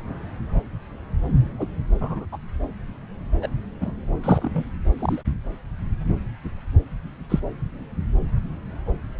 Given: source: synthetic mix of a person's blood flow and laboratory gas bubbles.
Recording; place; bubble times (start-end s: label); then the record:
Doppler ultrasound of blood flow; subclavian vein
1.59-1.66 s: bubbles
2.01-2.25 s: bubbles
2.32-2.37 s: bubbles
3.41-3.48 s: bubbles
3.81-3.91 s: bubbles
4.24-4.64 s: bubbles
4.99-5.22 s: bubbles
7.29-7.40 s: bubbles
From the record:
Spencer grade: 2 (many but less than half of the cardiac periods contain bubble signals, singularly or in groups); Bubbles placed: anywhere in the cardiac cycle